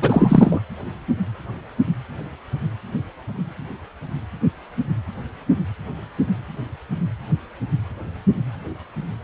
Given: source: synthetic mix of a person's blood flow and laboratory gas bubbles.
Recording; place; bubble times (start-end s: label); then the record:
Doppler ultrasound of blood flow; precordium
0.02-0.60 s: bubbles
From the record:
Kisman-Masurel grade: 213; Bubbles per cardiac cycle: several, 3 to 8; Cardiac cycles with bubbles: 1 to 10%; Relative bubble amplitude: loud (0.450 to 0.775); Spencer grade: 1 (occasional bubble signal discernible with the cardiac motion signal, with majority of cardiac periods free of bubbles); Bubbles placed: anywhere in the cardiac cycle